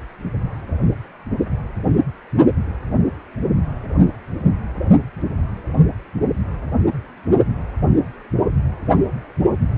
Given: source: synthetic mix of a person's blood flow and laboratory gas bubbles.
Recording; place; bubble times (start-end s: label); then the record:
Doppler ultrasound of blood flow; precordium
no bubbles
From the record:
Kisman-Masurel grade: 000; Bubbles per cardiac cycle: 0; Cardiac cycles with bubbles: 0%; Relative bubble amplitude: no bubbles discernible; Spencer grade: 0 (complete lack of bubble signals)